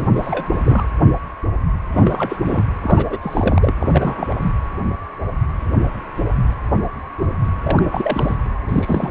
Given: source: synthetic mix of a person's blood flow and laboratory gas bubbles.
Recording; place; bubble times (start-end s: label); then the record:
Doppler ultrasound of blood flow; precordium
0.00-0.08 s: bubbles
0.15-0.45 s: bubbles
0.63-0.84 s: bubbles
1.91-2.36 s: bubbles
2.44-2.62 s: bubbles
2.80-3.74 s: bubbles
3.80-4.35 s: bubbles
4.41-4.52 s: bubbles
7.63-8.35 s: bubbles
8.69-9.11 s: bubbles
From the record:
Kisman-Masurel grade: 332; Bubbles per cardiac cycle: rolling drumbeat, 9 or more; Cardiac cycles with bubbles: 50 to 99%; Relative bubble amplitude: moderate (0.250 to 0.450); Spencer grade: 3 (all of the cardiac periods contain showers or single bubble signals, but not dominating or overriding the cardiac motion signals); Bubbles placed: anywhere in the cardiac cycle